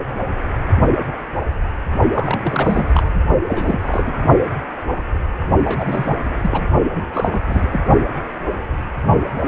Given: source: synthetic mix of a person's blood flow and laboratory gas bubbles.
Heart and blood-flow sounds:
Doppler ultrasound of blood flow; precordium
2.12-3.10 s: bubbles
3.48-4.18 s: bubbles
5.59-6.17 s: bubbles
6.41-6.62 s: bubbles
6.95-7.05 s: bubbles
7.13-7.41 s: bubbles
7.47-7.81 s: bubbles
From the record:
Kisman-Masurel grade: 332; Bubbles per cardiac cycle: rolling drumbeat, 9 or more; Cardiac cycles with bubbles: 50 to 99%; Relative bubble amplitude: moderate (0.250 to 0.450); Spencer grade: 3 (all of the cardiac periods contain showers or single bubble signals, but not dominating or overriding the cardiac motion signals); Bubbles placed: only in the low amplitude regions of the cardiac cycle

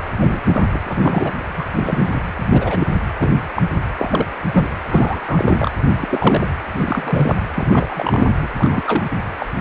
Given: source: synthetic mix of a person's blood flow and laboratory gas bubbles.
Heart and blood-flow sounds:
Doppler ultrasound of blood flow; precordium
0.21-0.42 s: bubbles
0.46-0.80 s: bubbles
0.84-1.32 s: bubbles
1.56-1.64 s: bubbles
1.74-2.22 s: bubbles
2.35-2.87 s: bubbles
3.19-3.39 s: bubbles
3.56-3.62 s: bubbles
3.98-4.27 s: bubbles
4.52-4.68 s: bubbles
4.89-5.71 s: bubbles
6.00-6.47 s: bubbles
6.75-7.43 s: bubbles
7.55-8.50 s: bubbles
8.58-8.83 s: bubbles
8.87-9.04 s: bubbles
9.39-9.46 s: bubbles
From the record:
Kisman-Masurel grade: 232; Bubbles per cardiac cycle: several, 3 to 8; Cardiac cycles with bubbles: 50 to 99%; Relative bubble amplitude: moderate (0.250 to 0.450); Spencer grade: 3 (all of the cardiac periods contain showers or single bubble signals, but not dominating or overriding the cardiac motion signals); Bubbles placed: anywhere in the cardiac cycle

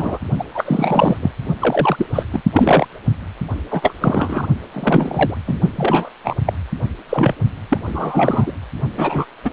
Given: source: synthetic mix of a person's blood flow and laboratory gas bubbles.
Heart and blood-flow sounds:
Doppler ultrasound of blood flow; precordium
0.00-0.18 s: bubbles
0.38-0.44 s: bubbles
0.55-1.17 s: bubbles
1.22-1.31 s: bubbles
1.60-2.06 s: bubbles
2.12-2.23 s: bubbles
2.32-2.42 s: bubbles
2.53-2.87 s: bubbles
3.71-3.94 s: bubbles
4.00-4.47 s: bubbles
4.74-5.38 s: bubbles
5.47-5.58 s: bubbles
5.75-6.09 s: bubbles
6.24-6.36 s: bubbles
6.46-6.53 s: bubbles
7.09-7.34 s: bubbles
7.68-7.78 s: bubbles
7.86-8.52 s: bubbles
8.97-9.26 s: bubbles
9.44-9.51 s: bubbles
From the record:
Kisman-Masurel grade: 233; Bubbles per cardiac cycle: several, 3 to 8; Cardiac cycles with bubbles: 50 to 99%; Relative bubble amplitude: loud (0.450 to 0.775); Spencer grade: 3 (all of the cardiac periods contain showers or single bubble signals, but not dominating or overriding the cardiac motion signals); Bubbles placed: only in the low amplitude regions of the cardiac cycle

